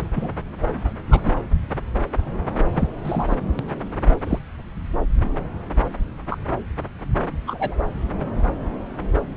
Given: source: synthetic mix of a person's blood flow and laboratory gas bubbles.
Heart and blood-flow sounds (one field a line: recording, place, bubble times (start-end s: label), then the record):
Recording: Doppler ultrasound of blood flow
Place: subclavian vein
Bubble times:
0.15-0.28 s: bubbles
1.10-1.20 s: bubbles
1.25-1.32 s: bubbles
2.72-2.88 s: bubbles
3.04-3.35 s: bubbles
3.59-3.64 s: bubbles
4.24-4.38 s: bubbles
6.30-6.37 s: bubbles
7.47-7.75 s: bubbles
From the record:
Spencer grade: 2 (many but less than half of the cardiac periods contain bubble signals, singularly or in groups)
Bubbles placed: anywhere in the cardiac cycle